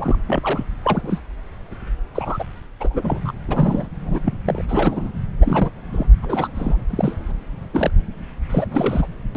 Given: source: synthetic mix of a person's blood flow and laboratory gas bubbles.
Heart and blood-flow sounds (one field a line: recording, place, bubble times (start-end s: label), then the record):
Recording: Doppler ultrasound of blood flow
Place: subclavian vein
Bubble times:
0.00-0.17 s: bubbles
0.26-0.68 s: bubbles
0.83-1.21 s: bubbles
2.15-2.45 s: bubbles
2.80-3.31 s: bubbles
3.49-3.86 s: bubbles
4.04-4.20 s: bubbles
4.25-4.36 s: bubbles
4.44-4.64 s: bubbles
4.68-5.09 s: bubbles
5.39-5.69 s: bubbles
5.92-6.06 s: bubbles
6.22-6.48 s: bubbles
6.55-6.83 s: bubbles
6.90-7.32 s: bubbles
7.73-7.90 s: bubbles
8.50-8.66 s: bubbles
8.71-9.07 s: bubbles
9.35-9.37 s: bubbles
From the record:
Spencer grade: 3 (all of the cardiac periods contain showers or single bubble signals, but not dominating or overriding the cardiac motion signals)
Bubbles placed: anywhere in the cardiac cycle